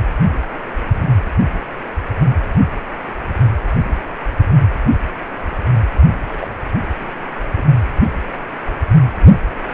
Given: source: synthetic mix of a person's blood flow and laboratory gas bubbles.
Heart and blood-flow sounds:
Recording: Doppler ultrasound of blood flow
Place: precordium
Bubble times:
6.28-6.48 s: bubbles
6.93-7.12 s: bubbles
7.52-7.62 s: bubbles
From the record:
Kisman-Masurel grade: 211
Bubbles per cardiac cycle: several, 3 to 8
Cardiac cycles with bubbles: 1 to 10%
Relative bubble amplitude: barely perceptible (0.100 to 0.250)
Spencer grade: 1 (occasional bubble signal discernible with the cardiac motion signal, with majority of cardiac periods free of bubbles)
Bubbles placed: anywhere in the cardiac cycle

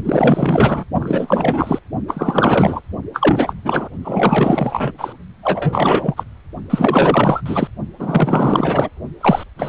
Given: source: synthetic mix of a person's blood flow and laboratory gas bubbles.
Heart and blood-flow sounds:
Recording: Doppler ultrasound of blood flow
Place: precordium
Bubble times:
0.04-0.84 s: bubbles
0.99-1.78 s: bubbles
2.07-2.81 s: bubbles
3.13-3.54 s: bubbles
3.64-3.88 s: bubbles
4.04-4.92 s: bubbles
4.98-5.13 s: bubbles
5.43-6.24 s: bubbles
6.70-7.42 s: bubbles
7.46-7.68 s: bubbles
7.99-8.89 s: bubbles
9.21-9.44 s: bubbles
9.57-9.69 s: bubbles
From the record:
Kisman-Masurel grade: 444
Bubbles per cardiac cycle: continuous sound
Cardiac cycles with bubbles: 100%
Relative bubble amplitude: maximal (0.775 to 0.999)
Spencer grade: 4 (maximum detectable bubble signal sounding continuously throughout systole and diastole of every cardiac period, and overriding the amplitude of the normal cardiac signals)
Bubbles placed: only in the low amplitude regions of the cardiac cycle

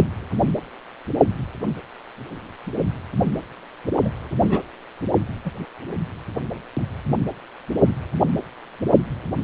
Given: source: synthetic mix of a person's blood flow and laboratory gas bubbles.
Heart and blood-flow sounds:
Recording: Doppler ultrasound of blood flow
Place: precordium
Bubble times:
4.04-4.09 s: bubbles
4.30-4.39 s: bubbles
4.41-4.62 s: bubbles
5.45-5.52 s: bubbles
From the record:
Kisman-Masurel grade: 211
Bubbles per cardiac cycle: several, 3 to 8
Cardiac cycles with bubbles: 1 to 10%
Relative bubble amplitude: barely perceptible (0.100 to 0.250)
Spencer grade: 1 (occasional bubble signal discernible with the cardiac motion signal, with majority of cardiac periods free of bubbles)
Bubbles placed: only in the low amplitude regions of the cardiac cycle

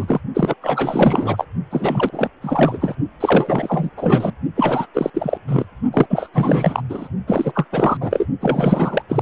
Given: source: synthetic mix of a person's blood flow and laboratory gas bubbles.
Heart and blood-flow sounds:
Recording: Doppler ultrasound of blood flow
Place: precordium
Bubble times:
0.00-0.21 s: bubbles
0.35-0.54 s: bubbles
0.61-1.45 s: bubbles
1.71-2.28 s: bubbles
2.42-2.95 s: bubbles
3.20-3.89 s: bubbles
3.97-4.31 s: bubbles
4.55-4.86 s: bubbles
4.94-5.10 s: bubbles
5.13-5.38 s: bubbles
5.47-5.66 s: bubbles
5.93-6.06 s: bubbles
6.09-6.29 s: bubbles
6.34-6.82 s: bubbles
6.89-7.08 s: bubbles
7.27-7.65 s: bubbles
7.71-7.97 s: bubbles
8.00-8.26 s: bubbles
8.40-9.02 s: bubbles
9.08-9.22 s: bubbles
From the record:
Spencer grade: 4 (maximum detectable bubble signal sounding continuously throughout systole and diastole of every cardiac period, and overriding the amplitude of the normal cardiac signals)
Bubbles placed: only in the low amplitude regions of the cardiac cycle

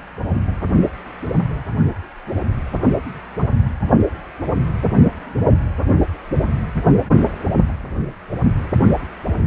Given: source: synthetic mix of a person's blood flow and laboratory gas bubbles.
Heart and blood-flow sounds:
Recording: Doppler ultrasound of blood flow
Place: precordium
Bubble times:
8.84-8.95 s: bubbles
From the record:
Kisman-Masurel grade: 111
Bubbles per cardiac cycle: 1 to 2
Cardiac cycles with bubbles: 1 to 10%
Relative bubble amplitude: barely perceptible (0.100 to 0.250)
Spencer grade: 1 (occasional bubble signal discernible with the cardiac motion signal, with majority of cardiac periods free of bubbles)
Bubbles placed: anywhere in the cardiac cycle

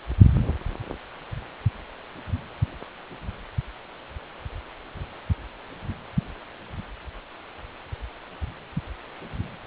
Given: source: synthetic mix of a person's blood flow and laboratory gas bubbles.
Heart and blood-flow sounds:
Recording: Doppler ultrasound of blood flow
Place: precordium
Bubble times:
no bubbles
From the record:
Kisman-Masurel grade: 000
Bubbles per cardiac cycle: 0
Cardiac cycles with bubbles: 0%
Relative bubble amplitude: no bubbles discernible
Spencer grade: 0 (complete lack of bubble signals)

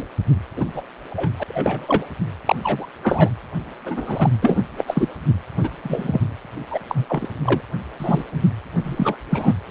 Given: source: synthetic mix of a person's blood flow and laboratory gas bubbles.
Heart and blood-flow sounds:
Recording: Doppler ultrasound of blood flow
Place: precordium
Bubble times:
0.00-0.07 s: bubbles
0.56-0.66 s: bubbles
0.73-0.82 s: bubbles
1.10-1.30 s: bubbles
1.39-1.44 s: bubbles
1.48-2.11 s: bubbles
2.45-2.56 s: bubbles
2.62-2.86 s: bubbles
3.03-3.29 s: bubbles
3.85-4.30 s: bubbles
4.42-4.63 s: bubbles
4.77-5.09 s: bubbles
5.62-5.70 s: bubbles
5.83-6.21 s: bubbles
6.70-6.79 s: bubbles
6.88-7.29 s: bubbles
7.44-7.61 s: bubbles
7.99-8.24 s: bubbles
8.33-8.41 s: bubbles
8.83-9.17 s: bubbles
9.30-9.54 s: bubbles
From the record:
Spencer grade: 3 (all of the cardiac periods contain showers or single bubble signals, but not dominating or overriding the cardiac motion signals)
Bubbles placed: anywhere in the cardiac cycle

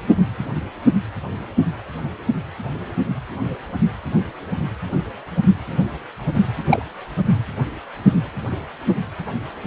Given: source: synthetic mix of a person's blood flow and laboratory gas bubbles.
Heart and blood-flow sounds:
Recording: Doppler ultrasound of blood flow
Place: precordium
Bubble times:
6.70-6.83 s: bubbles
From the record:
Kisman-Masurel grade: 113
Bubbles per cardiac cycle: 1 to 2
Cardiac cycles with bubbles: 1 to 10%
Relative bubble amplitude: loud (0.450 to 0.775)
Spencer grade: 1 (occasional bubble signal discernible with the cardiac motion signal, with majority of cardiac periods free of bubbles)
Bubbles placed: anywhere in the cardiac cycle

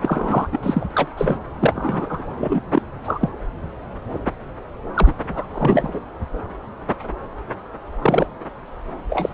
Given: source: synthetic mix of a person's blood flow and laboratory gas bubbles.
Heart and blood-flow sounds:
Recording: Doppler ultrasound of blood flow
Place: subclavian vein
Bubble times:
0.02-0.48 s: bubbles
0.52-0.58 s: bubbles
0.62-0.86 s: bubbles
0.91-1.07 s: bubbles
1.17-1.38 s: bubbles
1.59-2.23 s: bubbles
2.39-2.60 s: bubbles
2.72-2.82 s: bubbles
3.06-3.29 s: bubbles
4.94-5.13 s: bubbles
5.24-5.99 s: bubbles
8.02-8.27 s: bubbles
9.10-9.29 s: bubbles
From the record:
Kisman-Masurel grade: 232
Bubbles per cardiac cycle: several, 3 to 8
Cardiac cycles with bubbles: 50 to 99%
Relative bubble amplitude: moderate (0.250 to 0.450)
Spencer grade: 3 (all of the cardiac periods contain showers or single bubble signals, but not dominating or overriding the cardiac motion signals)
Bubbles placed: anywhere in the cardiac cycle

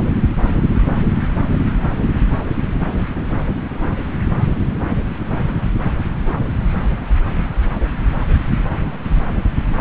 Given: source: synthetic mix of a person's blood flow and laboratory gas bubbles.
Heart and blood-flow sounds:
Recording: Doppler ultrasound of blood flow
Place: subclavian vein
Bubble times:
no bubbles
From the record:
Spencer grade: 0 (complete lack of bubble signals)

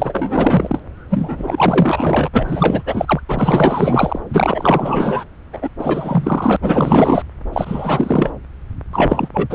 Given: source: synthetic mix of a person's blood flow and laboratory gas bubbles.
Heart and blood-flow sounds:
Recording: Doppler ultrasound of blood flow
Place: subclavian vein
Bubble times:
0.00-0.80 s: bubbles
1.10-2.28 s: bubbles
2.32-3.21 s: bubbles
3.28-4.20 s: bubbles
4.29-5.24 s: bubbles
5.53-5.69 s: bubbles
5.79-6.57 s: bubbles
6.62-7.24 s: bubbles
7.53-8.31 s: bubbles
8.92-9.29 s: bubbles
9.33-9.55 s: bubbles
From the record:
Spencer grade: 4 (maximum detectable bubble signal sounding continuously throughout systole and diastole of every cardiac period, and overriding the amplitude of the normal cardiac signals)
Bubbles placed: anywhere in the cardiac cycle

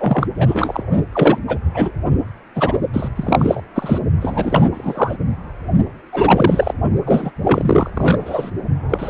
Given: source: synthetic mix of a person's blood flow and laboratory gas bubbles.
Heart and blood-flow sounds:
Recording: Doppler ultrasound of blood flow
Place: precordium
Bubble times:
0.00-0.27 s: bubbles
0.35-0.83 s: bubbles
1.12-1.39 s: bubbles
1.47-1.60 s: bubbles
1.74-1.91 s: bubbles
2.55-2.73 s: bubbles
2.93-3.09 s: bubbles
3.15-3.61 s: bubbles
3.75-3.99 s: bubbles
4.21-4.69 s: bubbles
4.74-5.17 s: bubbles
6.12-6.73 s: bubbles
7.06-7.31 s: bubbles
7.44-7.90 s: bubbles
7.95-8.51 s: bubbles
8.89-9.10 s: bubbles
From the record:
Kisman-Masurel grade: 343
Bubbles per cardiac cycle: rolling drumbeat, 9 or more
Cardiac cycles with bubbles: 100%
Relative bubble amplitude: loud (0.450 to 0.775)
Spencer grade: 3 (all of the cardiac periods contain showers or single bubble signals, but not dominating or overriding the cardiac motion signals)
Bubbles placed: only in the low amplitude regions of the cardiac cycle

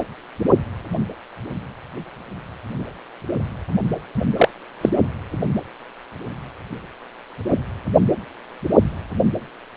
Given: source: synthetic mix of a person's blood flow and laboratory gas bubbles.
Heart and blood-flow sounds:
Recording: Doppler ultrasound of blood flow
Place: precordium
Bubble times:
4.37-4.49 s: bubbles
4.81-4.89 s: bubbles
From the record:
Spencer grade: 1 (occasional bubble signal discernible with the cardiac motion signal, with majority of cardiac periods free of bubbles)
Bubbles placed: only in the low amplitude regions of the cardiac cycle

